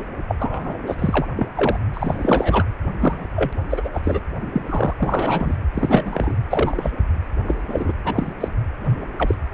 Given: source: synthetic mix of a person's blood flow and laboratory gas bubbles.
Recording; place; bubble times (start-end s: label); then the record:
Doppler ultrasound of blood flow; precordium
0.00-0.05 s: bubbles
0.28-0.35 s: bubbles
0.39-1.27 s: bubbles
1.35-1.47 s: bubbles
1.55-1.79 s: bubbles
1.94-2.64 s: bubbles
3.00-3.27 s: bubbles
3.36-3.51 s: bubbles
3.69-3.90 s: bubbles
3.93-4.00 s: bubbles
4.04-4.20 s: bubbles
4.52-4.62 s: bubbles
4.69-4.93 s: bubbles
4.98-5.55 s: bubbles
5.74-6.35 s: bubbles
6.50-6.91 s: bubbles
7.47-7.55 s: bubbles
7.67-7.92 s: bubbles
8.04-8.33 s: bubbles
8.40-8.48 s: bubbles
8.84-8.99 s: bubbles
9.18-9.35 s: bubbles
From the record:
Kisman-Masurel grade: 233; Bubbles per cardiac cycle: several, 3 to 8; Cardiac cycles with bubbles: 50 to 99%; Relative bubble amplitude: loud (0.450 to 0.775); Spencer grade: 3 (all of the cardiac periods contain showers or single bubble signals, but not dominating or overriding the cardiac motion signals); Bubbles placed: anywhere in the cardiac cycle